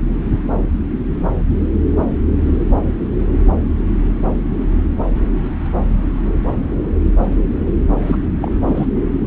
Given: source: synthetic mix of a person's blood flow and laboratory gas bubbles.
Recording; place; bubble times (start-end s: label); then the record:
Doppler ultrasound of blood flow; subclavian vein
8.06-8.17 s: bubbles
8.42-8.51 s: bubbles
8.62-8.86 s: bubbles
From the record:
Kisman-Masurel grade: 222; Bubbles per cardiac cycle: several, 3 to 8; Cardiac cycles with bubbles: 10 to 50%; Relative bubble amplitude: moderate (0.250 to 0.450); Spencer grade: 2 (many but less than half of the cardiac periods contain bubble signals, singularly or in groups); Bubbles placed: anywhere in the cardiac cycle